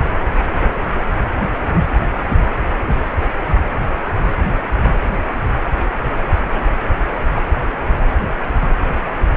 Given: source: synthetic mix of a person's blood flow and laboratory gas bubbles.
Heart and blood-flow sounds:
Doppler ultrasound of blood flow; precordium
no bubbles
From the record:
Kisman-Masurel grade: 000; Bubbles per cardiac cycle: 0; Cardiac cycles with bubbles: 0%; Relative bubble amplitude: no bubbles discernible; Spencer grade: 0 (complete lack of bubble signals)

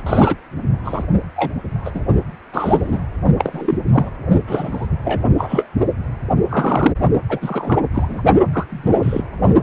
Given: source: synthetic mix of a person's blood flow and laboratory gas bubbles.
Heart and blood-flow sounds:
Doppler ultrasound of blood flow; precordium
0.00-0.03 s: bubbles
0.06-0.36 s: bubbles
0.84-1.03 s: bubbles
1.35-1.53 s: bubbles
1.84-1.91 s: bubbles
1.95-2.00 s: bubbles
2.52-3.01 s: bubbles
3.38-3.77 s: bubbles
3.86-4.10 s: bubbles
4.47-4.88 s: bubbles
5.04-5.24 s: bubbles
5.38-5.69 s: bubbles
6.49-6.94 s: bubbles
7.29-7.80 s: bubbles
7.94-8.22 s: bubbles
8.53-8.67 s: bubbles
8.70-9.22 s: bubbles
From the record:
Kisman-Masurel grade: 243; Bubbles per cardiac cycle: several, 3 to 8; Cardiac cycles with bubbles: 100%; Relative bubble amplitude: loud (0.450 to 0.775); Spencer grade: 3 (all of the cardiac periods contain showers or single bubble signals, but not dominating or overriding the cardiac motion signals); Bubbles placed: only in the low amplitude regions of the cardiac cycle

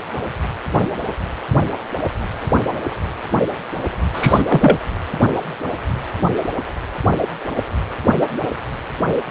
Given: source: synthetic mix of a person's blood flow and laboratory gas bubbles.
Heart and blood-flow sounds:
Doppler ultrasound of blood flow; precordium
4.13-4.42 s: bubbles
4.47-4.77 s: bubbles
From the record:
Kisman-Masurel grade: 213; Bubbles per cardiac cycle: several, 3 to 8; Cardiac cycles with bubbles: 1 to 10%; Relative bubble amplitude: loud (0.450 to 0.775); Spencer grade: 1 (occasional bubble signal discernible with the cardiac motion signal, with majority of cardiac periods free of bubbles); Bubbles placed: anywhere in the cardiac cycle

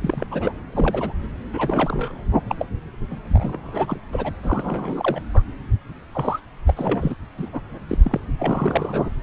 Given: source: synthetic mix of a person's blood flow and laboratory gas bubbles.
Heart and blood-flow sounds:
Doppler ultrasound of blood flow; subclavian vein
0.02-0.24 s: bubbles
0.31-0.53 s: bubbles
0.71-1.12 s: bubbles
1.53-2.23 s: bubbles
2.48-2.56 s: bubbles
2.58-2.66 s: bubbles
3.10-3.19 s: bubbles
3.33-3.98 s: bubbles
4.12-4.32 s: bubbles
4.42-5.21 s: bubbles
5.33-5.42 s: bubbles
6.13-6.40 s: bubbles
6.67-7.15 s: bubbles
7.38-7.49 s: bubbles
7.53-7.61 s: bubbles
7.89-7.98 s: bubbles
8.02-8.20 s: bubbles
8.39-9.10 s: bubbles
From the record:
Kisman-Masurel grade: 332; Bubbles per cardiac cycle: rolling drumbeat, 9 or more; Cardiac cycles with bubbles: 50 to 99%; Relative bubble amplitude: moderate (0.250 to 0.450); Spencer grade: 3 (all of the cardiac periods contain showers or single bubble signals, but not dominating or overriding the cardiac motion signals); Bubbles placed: anywhere in the cardiac cycle

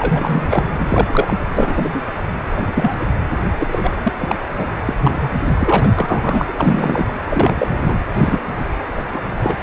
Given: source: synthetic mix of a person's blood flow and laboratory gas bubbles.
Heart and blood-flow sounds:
Doppler ultrasound of blood flow; precordium
0.00-0.70 s: bubbles
0.78-1.37 s: bubbles
1.54-2.02 s: bubbles
2.56-3.06 s: bubbles
3.58-3.99 s: bubbles
4.03-4.12 s: bubbles
4.20-4.36 s: bubbles
4.58-4.67 s: bubbles
4.86-4.96 s: bubbles
5.00-5.30 s: bubbles
5.58-5.88 s: bubbles
5.95-6.44 s: bubbles
6.46-7.04 s: bubbles
7.29-7.98 s: bubbles
8.14-8.40 s: bubbles
8.58-8.64 s: bubbles
8.95-9.04 s: bubbles
9.13-9.18 s: bubbles
9.36-9.56 s: bubbles
From the record:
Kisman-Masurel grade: 243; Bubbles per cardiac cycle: several, 3 to 8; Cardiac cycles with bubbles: 100%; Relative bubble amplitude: loud (0.450 to 0.775); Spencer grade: 3 (all of the cardiac periods contain showers or single bubble signals, but not dominating or overriding the cardiac motion signals); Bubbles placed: anywhere in the cardiac cycle

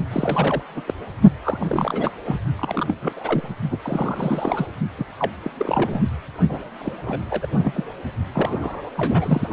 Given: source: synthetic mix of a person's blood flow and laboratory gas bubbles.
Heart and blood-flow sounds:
Doppler ultrasound of blood flow; precordium
0.11-0.62 s: bubbles
0.74-0.81 s: bubbles
0.87-0.94 s: bubbles
1.43-2.11 s: bubbles
2.25-2.37 s: bubbles
2.56-2.85 s: bubbles
2.88-2.94 s: bubbles
3.02-3.12 s: bubbles
3.16-3.48 s: bubbles
3.70-3.78 s: bubbles
3.82-4.67 s: bubbles
4.98-5.04 s: bubbles
5.19-5.30 s: bubbles
5.42-5.51 s: bubbles
5.57-6.02 s: bubbles
6.49-6.68 s: bubbles
6.78-6.96 s: bubbles
7.02-7.19 s: bubbles
7.30-7.47 s: bubbles
7.57-7.83 s: bubbles
8.33-8.81 s: bubbles
8.96-9.49 s: bubbles
From the record:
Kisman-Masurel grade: 332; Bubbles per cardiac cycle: rolling drumbeat, 9 or more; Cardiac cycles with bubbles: 50 to 99%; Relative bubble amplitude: moderate (0.250 to 0.450); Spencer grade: 3 (all of the cardiac periods contain showers or single bubble signals, but not dominating or overriding the cardiac motion signals); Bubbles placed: only in the low amplitude regions of the cardiac cycle

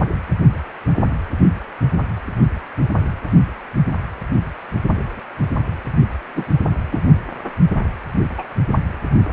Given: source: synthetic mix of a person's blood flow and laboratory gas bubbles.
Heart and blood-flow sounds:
Doppler ultrasound of blood flow; precordium
6.36-6.44 s: bubbles
6.91-7.01 s: bubbles
8.38-8.43 s: bubbles
From the record:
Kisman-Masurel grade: 123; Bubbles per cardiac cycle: 1 to 2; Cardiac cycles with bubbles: 10 to 50%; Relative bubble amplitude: loud (0.450 to 0.775); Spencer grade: 2 (many but less than half of the cardiac periods contain bubble signals, singularly or in groups); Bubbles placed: only in the low amplitude regions of the cardiac cycle

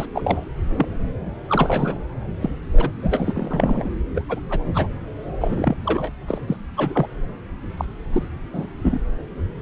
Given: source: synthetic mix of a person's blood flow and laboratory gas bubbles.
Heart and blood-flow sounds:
Doppler ultrasound of blood flow; subclavian vein
0.00-0.06 s: bubbles
0.13-0.48 s: bubbles
0.76-0.88 s: bubbles
1.48-1.98 s: bubbles
2.41-2.50 s: bubbles
2.73-2.91 s: bubbles
3.03-3.90 s: bubbles
4.15-4.22 s: bubbles
4.29-4.40 s: bubbles
4.50-4.67 s: bubbles
4.74-4.88 s: bubbles
5.40-5.77 s: bubbles
5.86-6.11 s: bubbles
6.28-6.39 s: bubbles
6.47-6.57 s: bubbles
6.77-7.07 s: bubbles
7.77-7.85 s: bubbles
8.12-8.23 s: bubbles
8.53-8.67 s: bubbles
8.82-8.99 s: bubbles
From the record:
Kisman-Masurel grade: 242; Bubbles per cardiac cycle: several, 3 to 8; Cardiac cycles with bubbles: 100%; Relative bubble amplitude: moderate (0.250 to 0.450); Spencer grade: 3 (all of the cardiac periods contain showers or single bubble signals, but not dominating or overriding the cardiac motion signals); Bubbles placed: anywhere in the cardiac cycle

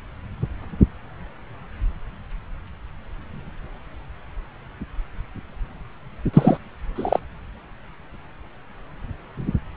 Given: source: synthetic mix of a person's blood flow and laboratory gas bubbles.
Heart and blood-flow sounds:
Doppler ultrasound of blood flow; subclavian vein
6.33-6.57 s: bubbles
6.96-7.20 s: bubbles
From the record:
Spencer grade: 2 (many but less than half of the cardiac periods contain bubble signals, singularly or in groups); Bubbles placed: anywhere in the cardiac cycle

